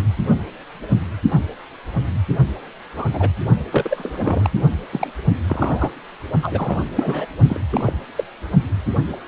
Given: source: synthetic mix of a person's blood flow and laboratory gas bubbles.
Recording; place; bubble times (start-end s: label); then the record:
Doppler ultrasound of blood flow; precordium
2.96-3.06 s: bubbles
3.13-3.29 s: bubbles
3.71-4.50 s: bubbles
4.92-5.08 s: bubbles
5.48-5.91 s: bubbles
6.42-6.80 s: bubbles
6.95-7.26 s: bubbles
7.49-7.59 s: bubbles
7.70-7.92 s: bubbles
8.15-8.24 s: bubbles
From the record:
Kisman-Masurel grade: 232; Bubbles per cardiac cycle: several, 3 to 8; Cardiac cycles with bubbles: 50 to 99%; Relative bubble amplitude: moderate (0.250 to 0.450); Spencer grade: 3 (all of the cardiac periods contain showers or single bubble signals, but not dominating or overriding the cardiac motion signals); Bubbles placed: only in the low amplitude regions of the cardiac cycle